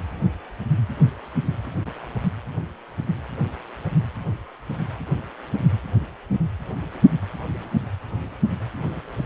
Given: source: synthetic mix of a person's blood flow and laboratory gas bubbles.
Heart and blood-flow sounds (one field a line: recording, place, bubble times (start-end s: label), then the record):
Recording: Doppler ultrasound of blood flow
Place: precordium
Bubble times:
no bubbles
From the record:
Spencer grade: 0 (complete lack of bubble signals)